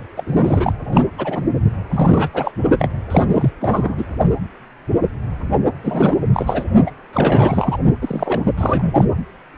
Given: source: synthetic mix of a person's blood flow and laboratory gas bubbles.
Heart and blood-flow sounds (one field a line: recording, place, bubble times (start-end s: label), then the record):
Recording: Doppler ultrasound of blood flow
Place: precordium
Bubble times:
0.17-0.24 s: bubbles
0.27-0.72 s: bubbles
0.92-1.03 s: bubbles
1.18-1.43 s: bubbles
1.90-2.29 s: bubbles
2.33-2.52 s: bubbles
2.79-2.88 s: bubbles
3.10-3.25 s: bubbles
3.33-3.50 s: bubbles
3.60-4.04 s: bubbles
5.83-6.19 s: bubbles
6.33-6.64 s: bubbles
6.87-6.91 s: bubbles
7.12-7.77 s: bubbles
8.01-8.39 s: bubbles
8.57-9.06 s: bubbles
From the record:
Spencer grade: 3 (all of the cardiac periods contain showers or single bubble signals, but not dominating or overriding the cardiac motion signals)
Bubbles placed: only in the low amplitude regions of the cardiac cycle